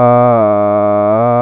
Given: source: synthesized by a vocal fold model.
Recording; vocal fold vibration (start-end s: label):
sustained vowel that changes in the middle
0.00-0.27 s: 121.1 Hz, open quotient 0.47
0.47-1.07 s: 104.0 Hz, open quotient 0.29
1.27-1.42 s: 121.1 Hz, open quotient 0.47